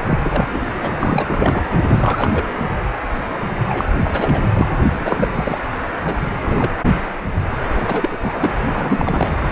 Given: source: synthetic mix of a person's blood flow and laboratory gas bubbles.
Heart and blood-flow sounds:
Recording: Doppler ultrasound of blood flow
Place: precordium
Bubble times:
0.05-0.61 s: bubbles
0.82-0.89 s: bubbles
0.98-1.65 s: bubbles
1.72-2.46 s: bubbles
3.69-3.85 s: bubbles
4.03-4.43 s: bubbles
4.53-4.67 s: bubbles
4.89-5.28 s: bubbles
5.35-5.58 s: bubbles
6.05-6.14 s: bubbles
6.25-6.31 s: bubbles
6.44-6.78 s: bubbles
7.80-8.18 s: bubbles
8.20-8.54 s: bubbles
8.73-9.31 s: bubbles
9.50-9.52 s: bubbles
From the record:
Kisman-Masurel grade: 332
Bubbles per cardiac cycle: rolling drumbeat, 9 or more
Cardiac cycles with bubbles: 50 to 99%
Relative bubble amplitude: moderate (0.250 to 0.450)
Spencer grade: 3 (all of the cardiac periods contain showers or single bubble signals, but not dominating or overriding the cardiac motion signals)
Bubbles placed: anywhere in the cardiac cycle

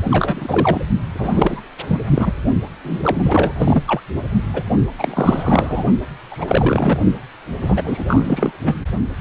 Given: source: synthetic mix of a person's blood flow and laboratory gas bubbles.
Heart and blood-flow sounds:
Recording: Doppler ultrasound of blood flow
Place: precordium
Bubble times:
0.03-0.81 s: bubbles
1.15-1.61 s: bubbles
1.87-2.00 s: bubbles
2.08-2.30 s: bubbles
2.84-3.53 s: bubbles
3.58-3.83 s: bubbles
3.87-4.01 s: bubbles
4.54-4.62 s: bubbles
4.99-5.85 s: bubbles
6.31-6.98 s: bubbles
7.61-8.57 s: bubbles
8.65-8.76 s: bubbles
9.19-9.21 s: bubbles
From the record:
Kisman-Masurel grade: 343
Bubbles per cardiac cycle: rolling drumbeat, 9 or more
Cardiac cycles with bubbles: 100%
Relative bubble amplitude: loud (0.450 to 0.775)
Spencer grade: 3 (all of the cardiac periods contain showers or single bubble signals, but not dominating or overriding the cardiac motion signals)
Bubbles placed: only in the low amplitude regions of the cardiac cycle

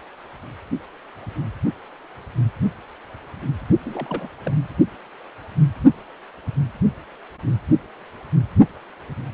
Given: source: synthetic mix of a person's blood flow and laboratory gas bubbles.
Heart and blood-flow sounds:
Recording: Doppler ultrasound of blood flow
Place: precordium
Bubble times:
3.85-4.29 s: bubbles
4.45-4.53 s: bubbles
From the record:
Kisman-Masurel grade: 221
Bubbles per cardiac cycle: several, 3 to 8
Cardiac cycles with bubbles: 10 to 50%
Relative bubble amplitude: barely perceptible (0.100 to 0.250)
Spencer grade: 2 (many but less than half of the cardiac periods contain bubble signals, singularly or in groups)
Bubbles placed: only in the low amplitude regions of the cardiac cycle

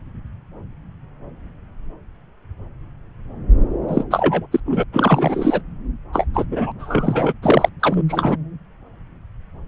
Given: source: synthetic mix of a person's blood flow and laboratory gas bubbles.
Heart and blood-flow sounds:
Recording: Doppler ultrasound of blood flow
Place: subclavian vein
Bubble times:
3.88-4.04 s: bubbles
4.11-4.46 s: bubbles
4.52-4.60 s: bubbles
4.65-4.83 s: bubbles
4.92-5.62 s: bubbles
6.12-6.25 s: bubbles
6.33-6.46 s: bubbles
6.51-6.72 s: bubbles
6.79-7.33 s: bubbles
7.42-7.69 s: bubbles
7.79-8.03 s: bubbles
8.08-8.37 s: bubbles
From the record:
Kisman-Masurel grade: 333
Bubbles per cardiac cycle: rolling drumbeat, 9 or more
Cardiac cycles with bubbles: 50 to 99%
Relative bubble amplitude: loud (0.450 to 0.775)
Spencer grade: 3 (all of the cardiac periods contain showers or single bubble signals, but not dominating or overriding the cardiac motion signals)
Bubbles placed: anywhere in the cardiac cycle

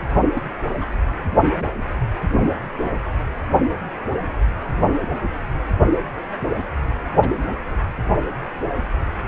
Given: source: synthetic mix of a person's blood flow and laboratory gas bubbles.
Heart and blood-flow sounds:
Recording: Doppler ultrasound of blood flow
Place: precordium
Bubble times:
0.33-0.42 s: bubbles
0.80-0.90 s: bubbles
1.58-1.67 s: bubbles
7.21-7.29 s: bubbles
From the record:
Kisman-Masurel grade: 121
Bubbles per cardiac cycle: 1 to 2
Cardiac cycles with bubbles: 10 to 50%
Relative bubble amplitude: barely perceptible (0.100 to 0.250)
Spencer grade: 2 (many but less than half of the cardiac periods contain bubble signals, singularly or in groups)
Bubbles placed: anywhere in the cardiac cycle

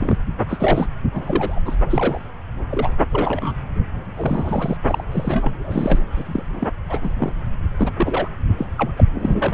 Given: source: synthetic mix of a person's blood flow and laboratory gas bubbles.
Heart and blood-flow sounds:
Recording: Doppler ultrasound of blood flow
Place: subclavian vein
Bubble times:
0.00-0.17 s: bubbles
0.48-0.86 s: bubbles
1.12-1.59 s: bubbles
1.65-1.76 s: bubbles
1.90-2.25 s: bubbles
2.70-2.92 s: bubbles
3.11-3.52 s: bubbles
4.04-4.77 s: bubbles
4.88-5.04 s: bubbles
5.12-5.55 s: bubbles
5.59-5.99 s: bubbles
6.16-6.43 s: bubbles
6.55-6.67 s: bubbles
6.89-6.98 s: bubbles
7.00-7.13 s: bubbles
7.18-7.33 s: bubbles
7.77-7.91 s: bubbles
7.97-8.29 s: bubbles
8.58-8.66 s: bubbles
8.78-8.91 s: bubbles
8.96-9.04 s: bubbles
9.14-9.54 s: bubbles
From the record:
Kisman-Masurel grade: 242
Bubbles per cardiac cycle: several, 3 to 8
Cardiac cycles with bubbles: 100%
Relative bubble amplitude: moderate (0.250 to 0.450)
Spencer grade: 3 (all of the cardiac periods contain showers or single bubble signals, but not dominating or overriding the cardiac motion signals)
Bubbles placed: anywhere in the cardiac cycle

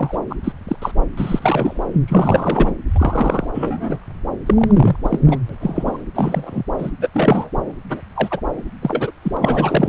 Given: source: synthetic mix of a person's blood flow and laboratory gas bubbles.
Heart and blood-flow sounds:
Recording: Doppler ultrasound of blood flow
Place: subclavian vein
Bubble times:
0.00-0.18 s: bubbles
0.29-0.35 s: bubbles
0.43-0.52 s: bubbles
0.68-0.76 s: bubbles
0.81-0.92 s: bubbles
1.17-1.83 s: bubbles
2.08-2.75 s: bubbles
2.96-3.47 s: bubbles
3.54-3.98 s: bubbles
4.46-4.96 s: bubbles
5.04-5.19 s: bubbles
5.26-5.38 s: bubbles
5.49-5.55 s: bubbles
5.60-5.97 s: bubbles
6.14-6.63 s: bubbles
6.78-6.91 s: bubbles
7.01-7.08 s: bubbles
7.13-7.50 s: bubbles
7.89-8.02 s: bubbles
8.15-8.40 s: bubbles
8.81-9.11 s: bubbles
9.22-9.89 s: bubbles
From the record:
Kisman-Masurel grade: 243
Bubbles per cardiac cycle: several, 3 to 8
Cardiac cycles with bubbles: 100%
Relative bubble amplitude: loud (0.450 to 0.775)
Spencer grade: 3 (all of the cardiac periods contain showers or single bubble signals, but not dominating or overriding the cardiac motion signals)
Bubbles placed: anywhere in the cardiac cycle

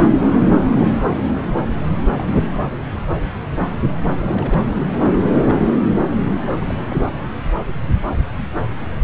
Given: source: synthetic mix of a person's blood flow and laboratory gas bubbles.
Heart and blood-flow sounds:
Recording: Doppler ultrasound of blood flow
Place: subclavian vein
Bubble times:
0.04-0.28 s: bubbles
2.17-2.35 s: bubbles
2.51-2.65 s: bubbles
2.92-3.00 s: bubbles
4.24-4.62 s: bubbles
5.06-5.31 s: bubbles
5.45-5.56 s: bubbles
6.60-6.74 s: bubbles
6.83-6.96 s: bubbles
From the record:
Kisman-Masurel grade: 221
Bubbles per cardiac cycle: several, 3 to 8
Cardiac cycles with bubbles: 10 to 50%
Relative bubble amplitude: barely perceptible (0.100 to 0.250)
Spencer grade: 2 (many but less than half of the cardiac periods contain bubble signals, singularly or in groups)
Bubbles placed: anywhere in the cardiac cycle

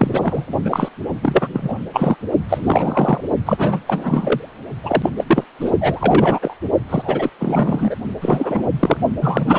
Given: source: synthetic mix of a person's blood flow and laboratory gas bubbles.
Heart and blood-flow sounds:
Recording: Doppler ultrasound of blood flow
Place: precordium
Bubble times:
0.00-0.54 s: bubbles
0.65-0.89 s: bubbles
1.23-1.48 s: bubbles
1.53-1.76 s: bubbles
1.93-2.17 s: bubbles
2.49-3.21 s: bubbles
3.46-3.80 s: bubbles
3.86-4.50 s: bubbles
4.83-5.10 s: bubbles
5.17-5.24 s: bubbles
5.26-5.44 s: bubbles
5.59-5.71 s: bubbles
5.80-6.56 s: bubbles
6.89-7.29 s: bubbles
7.39-7.95 s: bubbles
8.21-8.63 s: bubbles
8.79-8.97 s: bubbles
9.21-9.59 s: bubbles
From the record:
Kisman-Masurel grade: 343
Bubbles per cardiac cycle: rolling drumbeat, 9 or more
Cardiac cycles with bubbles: 100%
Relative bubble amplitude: loud (0.450 to 0.775)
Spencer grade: 3 (all of the cardiac periods contain showers or single bubble signals, but not dominating or overriding the cardiac motion signals)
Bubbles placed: only in the low amplitude regions of the cardiac cycle

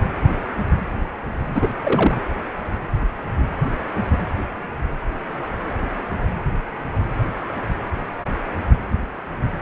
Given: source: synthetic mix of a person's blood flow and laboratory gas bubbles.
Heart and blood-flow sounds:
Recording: Doppler ultrasound of blood flow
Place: precordium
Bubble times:
1.54-1.69 s: bubbles
1.83-2.20 s: bubbles
From the record:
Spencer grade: 1 (occasional bubble signal discernible with the cardiac motion signal, with majority of cardiac periods free of bubbles)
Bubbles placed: anywhere in the cardiac cycle

